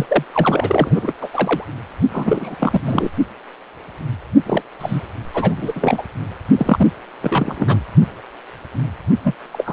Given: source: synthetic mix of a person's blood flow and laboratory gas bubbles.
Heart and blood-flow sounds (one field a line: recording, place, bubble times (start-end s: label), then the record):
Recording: Doppler ultrasound of blood flow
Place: precordium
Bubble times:
0.00-0.24 s: bubbles
0.32-1.12 s: bubbles
1.20-1.28 s: bubbles
1.33-1.64 s: bubbles
2.12-2.56 s: bubbles
2.58-2.81 s: bubbles
2.85-3.09 s: bubbles
4.46-4.62 s: bubbles
4.79-5.02 s: bubbles
5.33-6.02 s: bubbles
6.57-6.87 s: bubbles
7.21-7.80 s: bubbles
9.24-9.34 s: bubbles
9.52-9.73 s: bubbles
From the record:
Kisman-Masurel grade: 332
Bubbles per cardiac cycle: rolling drumbeat, 9 or more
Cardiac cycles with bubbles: 50 to 99%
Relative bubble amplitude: moderate (0.250 to 0.450)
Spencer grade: 3 (all of the cardiac periods contain showers or single bubble signals, but not dominating or overriding the cardiac motion signals)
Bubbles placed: only in the low amplitude regions of the cardiac cycle